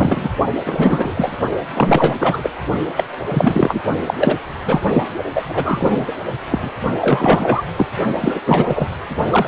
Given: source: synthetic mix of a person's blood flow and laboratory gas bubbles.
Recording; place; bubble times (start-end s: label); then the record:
Doppler ultrasound of blood flow; precordium
0.00-0.29 s: bubbles
0.65-1.33 s: bubbles
1.74-2.15 s: bubbles
2.20-2.50 s: bubbles
2.96-3.04 s: bubbles
3.28-3.80 s: bubbles
4.06-4.14 s: bubbles
4.20-4.36 s: bubbles
4.66-4.81 s: bubbles
4.93-5.03 s: bubbles
5.34-5.45 s: bubbles
5.49-6.13 s: bubbles
6.50-6.69 s: bubbles
7.00-7.67 s: bubbles
7.77-7.87 s: bubbles
8.20-8.40 s: bubbles
8.46-8.87 s: bubbles
9.30-9.48 s: bubbles
From the record:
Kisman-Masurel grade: 333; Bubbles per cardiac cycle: rolling drumbeat, 9 or more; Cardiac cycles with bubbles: 50 to 99%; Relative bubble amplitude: loud (0.450 to 0.775); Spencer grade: 3 (all of the cardiac periods contain showers or single bubble signals, but not dominating or overriding the cardiac motion signals); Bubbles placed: only in the low amplitude regions of the cardiac cycle